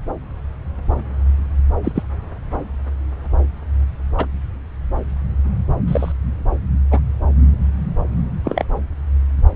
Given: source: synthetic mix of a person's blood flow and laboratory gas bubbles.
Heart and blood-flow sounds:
Doppler ultrasound of blood flow; subclavian vein
1.83-1.92 s: bubbles
1.95-2.03 s: bubbles
4.17-4.26 s: bubbles
5.88-6.12 s: bubbles
6.91-6.99 s: bubbles
8.44-8.65 s: bubbles
From the record:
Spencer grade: 2 (many but less than half of the cardiac periods contain bubble signals, singularly or in groups); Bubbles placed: anywhere in the cardiac cycle

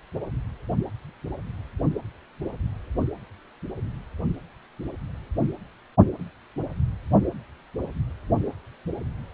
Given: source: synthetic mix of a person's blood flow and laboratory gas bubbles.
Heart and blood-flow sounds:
Doppler ultrasound of blood flow; precordium
no bubbles
From the record:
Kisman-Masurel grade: 000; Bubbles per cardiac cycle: 0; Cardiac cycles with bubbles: 0%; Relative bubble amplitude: no bubbles discernible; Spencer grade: 0 (complete lack of bubble signals)

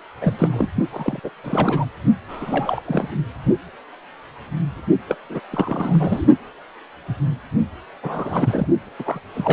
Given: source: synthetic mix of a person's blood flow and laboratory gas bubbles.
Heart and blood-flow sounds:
Doppler ultrasound of blood flow; precordium
0.21-0.69 s: bubbles
0.93-1.20 s: bubbles
1.24-1.29 s: bubbles
1.44-1.85 s: bubbles
2.28-2.82 s: bubbles
2.85-3.09 s: bubbles
5.08-5.15 s: bubbles
5.29-5.40 s: bubbles
5.50-6.28 s: bubbles
8.03-8.67 s: bubbles
8.98-9.20 s: bubbles
9.34-9.53 s: bubbles
From the record:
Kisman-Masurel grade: 332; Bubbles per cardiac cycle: rolling drumbeat, 9 or more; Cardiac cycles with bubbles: 50 to 99%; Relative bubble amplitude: moderate (0.250 to 0.450); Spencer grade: 3 (all of the cardiac periods contain showers or single bubble signals, but not dominating or overriding the cardiac motion signals); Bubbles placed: only in the low amplitude regions of the cardiac cycle

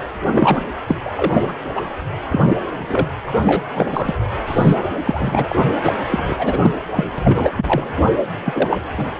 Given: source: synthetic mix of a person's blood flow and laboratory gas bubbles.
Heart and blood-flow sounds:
Doppler ultrasound of blood flow; precordium
0.25-0.63 s: bubbles
0.88-0.96 s: bubbles
1.05-1.11 s: bubbles
1.15-1.54 s: bubbles
1.75-1.83 s: bubbles
2.31-2.57 s: bubbles
2.77-3.08 s: bubbles
3.27-3.33 s: bubbles
3.41-3.64 s: bubbles
3.74-4.15 s: bubbles
4.46-4.77 s: bubbles
5.04-5.55 s: bubbles
5.83-5.95 s: bubbles
6.11-6.36 s: bubbles
6.38-6.71 s: bubbles
6.96-7.04 s: bubbles
7.18-7.53 s: bubbles
7.56-7.92 s: bubbles
8.45-8.81 s: bubbles
8.96-9.16 s: bubbles
From the record:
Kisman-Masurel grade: 343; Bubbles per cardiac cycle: rolling drumbeat, 9 or more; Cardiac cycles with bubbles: 100%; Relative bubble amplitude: loud (0.450 to 0.775); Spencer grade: 3 (all of the cardiac periods contain showers or single bubble signals, but not dominating or overriding the cardiac motion signals); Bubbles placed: anywhere in the cardiac cycle

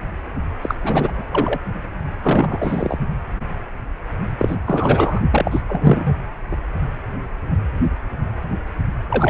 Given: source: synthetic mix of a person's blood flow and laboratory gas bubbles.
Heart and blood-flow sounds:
Doppler ultrasound of blood flow; precordium
0.61-0.75 s: bubbles
0.81-1.11 s: bubbles
1.15-1.59 s: bubbles
2.22-2.99 s: bubbles
4.38-4.56 s: bubbles
4.66-5.21 s: bubbles
5.31-5.62 s: bubbles
5.68-6.16 s: bubbles
6.51-6.56 s: bubbles
9.10-9.30 s: bubbles
From the record:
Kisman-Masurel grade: 333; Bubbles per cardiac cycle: rolling drumbeat, 9 or more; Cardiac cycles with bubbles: 50 to 99%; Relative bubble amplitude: loud (0.450 to 0.775); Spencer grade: 3 (all of the cardiac periods contain showers or single bubble signals, but not dominating or overriding the cardiac motion signals); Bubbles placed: only in the low amplitude regions of the cardiac cycle

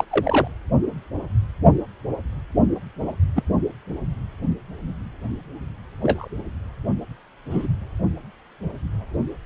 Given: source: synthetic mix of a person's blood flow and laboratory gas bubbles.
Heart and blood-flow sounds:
Doppler ultrasound of blood flow; precordium
0.00-0.04 s: bubbles
0.10-0.47 s: bubbles
3.06-3.13 s: bubbles
3.35-3.42 s: bubbles
6.01-6.29 s: bubbles
7.50-7.67 s: bubbles
From the record:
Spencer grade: 2 (many but less than half of the cardiac periods contain bubble signals, singularly or in groups); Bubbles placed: only in the low amplitude regions of the cardiac cycle

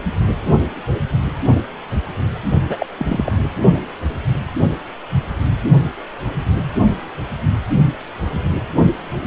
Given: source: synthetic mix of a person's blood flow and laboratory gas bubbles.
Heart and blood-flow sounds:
Doppler ultrasound of blood flow; precordium
2.69-2.86 s: bubbles
2.98-3.47 s: bubbles
From the record:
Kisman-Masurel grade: 212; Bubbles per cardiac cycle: several, 3 to 8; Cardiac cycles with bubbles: 1 to 10%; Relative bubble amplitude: moderate (0.250 to 0.450); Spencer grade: 1 (occasional bubble signal discernible with the cardiac motion signal, with majority of cardiac periods free of bubbles); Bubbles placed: only in the low amplitude regions of the cardiac cycle

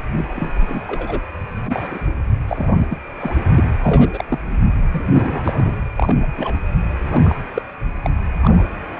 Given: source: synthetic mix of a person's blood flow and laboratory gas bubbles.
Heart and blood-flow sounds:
Doppler ultrasound of blood flow; precordium
0.35-0.52 s: bubbles
0.68-0.81 s: bubbles
0.84-1.21 s: bubbles
1.66-1.99 s: bubbles
2.48-2.98 s: bubbles
3.19-3.40 s: bubbles
3.55-3.65 s: bubbles
3.82-4.11 s: bubbles
4.13-4.25 s: bubbles
4.29-4.39 s: bubbles
4.92-5.78 s: bubbles
5.96-6.32 s: bubbles
6.37-6.55 s: bubbles
7.11-7.36 s: bubbles
7.54-7.62 s: bubbles
8.04-8.10 s: bubbles
8.41-8.65 s: bubbles
From the record:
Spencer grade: 3 (all of the cardiac periods contain showers or single bubble signals, but not dominating or overriding the cardiac motion signals); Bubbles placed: anywhere in the cardiac cycle

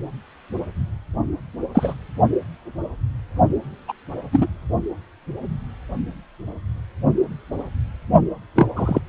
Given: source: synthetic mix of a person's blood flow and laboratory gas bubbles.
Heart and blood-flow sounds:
Doppler ultrasound of blood flow; precordium
1.74-1.94 s: bubbles
3.88-3.93 s: bubbles
4.32-4.47 s: bubbles
8.55-8.67 s: bubbles
8.75-9.00 s: bubbles
From the record:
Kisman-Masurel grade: 123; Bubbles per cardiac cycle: 1 to 2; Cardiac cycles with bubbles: 10 to 50%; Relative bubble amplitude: loud (0.450 to 0.775); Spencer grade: 2 (many but less than half of the cardiac periods contain bubble signals, singularly or in groups); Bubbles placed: only in the low amplitude regions of the cardiac cycle

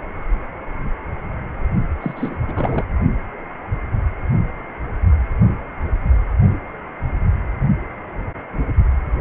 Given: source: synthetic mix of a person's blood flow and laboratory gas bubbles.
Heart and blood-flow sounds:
Doppler ultrasound of blood flow; precordium
2.00-2.37 s: bubbles
2.48-2.85 s: bubbles
From the record:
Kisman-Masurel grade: 222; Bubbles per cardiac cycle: several, 3 to 8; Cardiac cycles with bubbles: 10 to 50%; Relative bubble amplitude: moderate (0.250 to 0.450); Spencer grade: 2 (many but less than half of the cardiac periods contain bubble signals, singularly or in groups); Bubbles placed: only in the low amplitude regions of the cardiac cycle

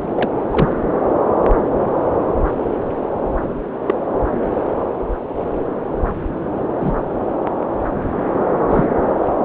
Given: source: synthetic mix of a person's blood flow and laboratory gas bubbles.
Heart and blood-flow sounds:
Doppler ultrasound of blood flow; subclavian vein
0.16-0.29 s: bubbles
0.51-0.77 s: bubbles
3.86-3.94 s: bubbles
6.81-6.92 s: bubbles
8.69-8.85 s: bubbles
From the record:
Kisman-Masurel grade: 122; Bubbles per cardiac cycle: 1 to 2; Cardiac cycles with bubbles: 10 to 50%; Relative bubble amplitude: moderate (0.250 to 0.450); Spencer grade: 2 (many but less than half of the cardiac periods contain bubble signals, singularly or in groups); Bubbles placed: anywhere in the cardiac cycle

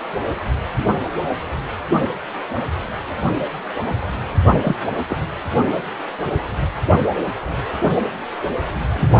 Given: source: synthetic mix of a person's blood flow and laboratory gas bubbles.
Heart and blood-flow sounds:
Doppler ultrasound of blood flow; precordium
4.64-4.76 s: bubbles
5.09-5.16 s: bubbles
8.93-9.09 s: bubbles
From the record:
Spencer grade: 2 (many but less than half of the cardiac periods contain bubble signals, singularly or in groups); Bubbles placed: anywhere in the cardiac cycle

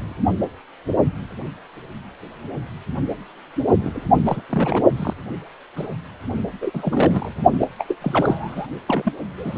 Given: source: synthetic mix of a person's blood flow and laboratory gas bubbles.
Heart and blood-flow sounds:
Doppler ultrasound of blood flow; precordium
3.80-4.02 s: bubbles
4.25-4.42 s: bubbles
4.50-4.83 s: bubbles
4.96-5.14 s: bubbles
5.76-5.88 s: bubbles
6.61-6.70 s: bubbles
6.74-7.32 s: bubbles
7.53-7.68 s: bubbles
7.78-7.84 s: bubbles
7.89-7.96 s: bubbles
8.01-8.66 s: bubbles
8.87-9.13 s: bubbles
9.38-9.57 s: bubbles
From the record:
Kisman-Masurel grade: 232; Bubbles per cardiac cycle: several, 3 to 8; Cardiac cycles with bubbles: 50 to 99%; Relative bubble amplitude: moderate (0.250 to 0.450); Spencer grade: 3 (all of the cardiac periods contain showers or single bubble signals, but not dominating or overriding the cardiac motion signals); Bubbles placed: only in the low amplitude regions of the cardiac cycle

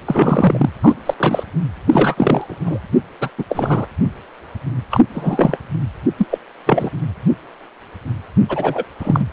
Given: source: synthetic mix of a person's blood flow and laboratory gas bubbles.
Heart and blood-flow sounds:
Doppler ultrasound of blood flow; precordium
0.05-0.70 s: bubbles
0.82-0.95 s: bubbles
1.06-1.14 s: bubbles
1.17-1.43 s: bubbles
1.92-2.58 s: bubbles
2.65-2.79 s: bubbles
3.21-3.29 s: bubbles
3.38-3.44 s: bubbles
3.49-3.86 s: bubbles
4.90-5.00 s: bubbles
5.14-5.57 s: bubbles
6.18-6.27 s: bubbles
6.30-6.38 s: bubbles
6.66-6.90 s: bubbles
8.49-8.85 s: bubbles
8.99-9.26 s: bubbles
From the record:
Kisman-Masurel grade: 233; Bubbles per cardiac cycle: several, 3 to 8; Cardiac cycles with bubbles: 50 to 99%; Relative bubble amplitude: loud (0.450 to 0.775); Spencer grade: 3 (all of the cardiac periods contain showers or single bubble signals, but not dominating or overriding the cardiac motion signals); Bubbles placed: anywhere in the cardiac cycle

